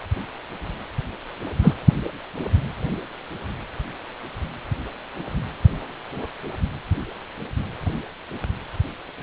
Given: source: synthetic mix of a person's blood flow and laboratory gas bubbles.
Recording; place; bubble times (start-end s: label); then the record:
Doppler ultrasound of blood flow; precordium
1.63-1.74 s: bubbles
From the record:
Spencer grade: 1 (occasional bubble signal discernible with the cardiac motion signal, with majority of cardiac periods free of bubbles); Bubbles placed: anywhere in the cardiac cycle